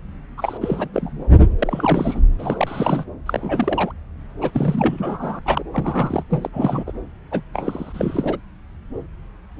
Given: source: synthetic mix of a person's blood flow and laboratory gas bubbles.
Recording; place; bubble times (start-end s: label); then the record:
Doppler ultrasound of blood flow; subclavian vein
0.38-0.58 s: bubbles
0.60-0.88 s: bubbles
0.93-1.24 s: bubbles
1.59-2.21 s: bubbles
2.38-3.04 s: bubbles
3.25-3.93 s: bubbles
4.41-4.51 s: bubbles
4.53-5.39 s: bubbles
5.45-5.64 s: bubbles
5.72-6.24 s: bubbles
6.31-6.50 s: bubbles
6.53-6.84 s: bubbles
6.87-6.92 s: bubbles
7.31-7.41 s: bubbles
7.54-8.38 s: bubbles
From the record:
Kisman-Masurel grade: 332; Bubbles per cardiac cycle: rolling drumbeat, 9 or more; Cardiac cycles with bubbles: 50 to 99%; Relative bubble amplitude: moderate (0.250 to 0.450); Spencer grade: 3 (all of the cardiac periods contain showers or single bubble signals, but not dominating or overriding the cardiac motion signals); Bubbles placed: anywhere in the cardiac cycle